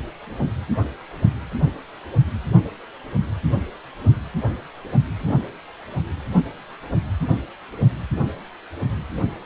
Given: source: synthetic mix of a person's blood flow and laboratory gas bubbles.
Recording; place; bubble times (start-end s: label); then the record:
Doppler ultrasound of blood flow; precordium
5.19-5.38 s: bubbles
From the record:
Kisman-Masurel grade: 111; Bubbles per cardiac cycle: 1 to 2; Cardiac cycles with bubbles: 1 to 10%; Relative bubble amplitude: barely perceptible (0.100 to 0.250); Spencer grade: 1 (occasional bubble signal discernible with the cardiac motion signal, with majority of cardiac periods free of bubbles); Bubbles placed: anywhere in the cardiac cycle